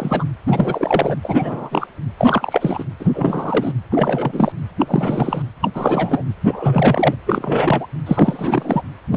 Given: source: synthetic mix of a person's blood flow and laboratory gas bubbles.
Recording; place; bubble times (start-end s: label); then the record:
Doppler ultrasound of blood flow; precordium
0.00-0.25 s: bubbles
0.47-1.18 s: bubbles
1.24-1.87 s: bubbles
2.17-2.84 s: bubbles
3.00-3.73 s: bubbles
3.91-4.52 s: bubbles
4.79-5.42 s: bubbles
5.62-5.71 s: bubbles
5.75-6.22 s: bubbles
6.44-7.15 s: bubbles
7.26-7.87 s: bubbles
8.06-8.81 s: bubbles
9.11-9.17 s: bubbles
From the record:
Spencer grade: 3 (all of the cardiac periods contain showers or single bubble signals, but not dominating or overriding the cardiac motion signals); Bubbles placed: anywhere in the cardiac cycle